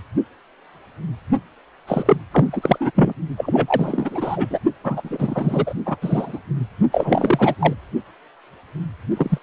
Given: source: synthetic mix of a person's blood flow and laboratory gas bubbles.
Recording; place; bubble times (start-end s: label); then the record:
Doppler ultrasound of blood flow; precordium
1.87-2.17 s: bubbles
2.30-2.91 s: bubbles
2.95-3.13 s: bubbles
3.37-4.47 s: bubbles
4.50-4.60 s: bubbles
4.83-5.74 s: bubbles
5.86-5.97 s: bubbles
6.02-6.39 s: bubbles
6.92-7.54 s: bubbles
7.59-7.74 s: bubbles
9.17-9.38 s: bubbles
From the record:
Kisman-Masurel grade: 333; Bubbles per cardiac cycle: rolling drumbeat, 9 or more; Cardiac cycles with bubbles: 50 to 99%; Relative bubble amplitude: loud (0.450 to 0.775); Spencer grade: 3 (all of the cardiac periods contain showers or single bubble signals, but not dominating or overriding the cardiac motion signals); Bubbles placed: only in the low amplitude regions of the cardiac cycle